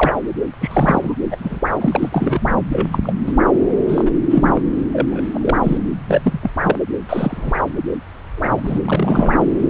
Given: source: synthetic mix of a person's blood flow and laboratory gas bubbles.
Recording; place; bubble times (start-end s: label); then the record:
Doppler ultrasound of blood flow; subclavian vein
0.00-0.13 s: bubbles
0.60-1.15 s: bubbles
1.31-1.36 s: bubbles
1.39-1.60 s: bubbles
1.80-2.08 s: bubbles
2.12-2.50 s: bubbles
2.72-2.87 s: bubbles
2.92-2.99 s: bubbles
3.04-3.12 s: bubbles
3.27-3.32 s: bubbles
3.88-4.11 s: bubbles
4.30-4.61 s: bubbles
4.92-5.21 s: bubbles
5.33-5.38 s: bubbles
5.41-5.56 s: bubbles
5.63-5.77 s: bubbles
6.08-6.21 s: bubbles
6.24-6.38 s: bubbles
6.42-6.51 s: bubbles
6.62-6.77 s: bubbles
7.09-7.63 s: bubbles
8.37-8.79 s: bubbles
8.85-9.44 s: bubbles
From the record:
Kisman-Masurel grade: 243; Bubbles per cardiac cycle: several, 3 to 8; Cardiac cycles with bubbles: 100%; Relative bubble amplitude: loud (0.450 to 0.775); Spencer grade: 3 (all of the cardiac periods contain showers or single bubble signals, but not dominating or overriding the cardiac motion signals); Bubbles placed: anywhere in the cardiac cycle